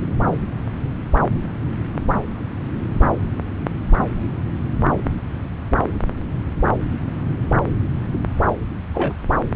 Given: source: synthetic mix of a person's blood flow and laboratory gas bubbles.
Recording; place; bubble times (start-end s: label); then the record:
Doppler ultrasound of blood flow; subclavian vein
8.94-9.13 s: bubbles
From the record:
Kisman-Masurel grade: 113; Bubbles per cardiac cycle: 1 to 2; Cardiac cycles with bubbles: 1 to 10%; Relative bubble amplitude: loud (0.450 to 0.775); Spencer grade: 1 (occasional bubble signal discernible with the cardiac motion signal, with majority of cardiac periods free of bubbles); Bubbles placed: anywhere in the cardiac cycle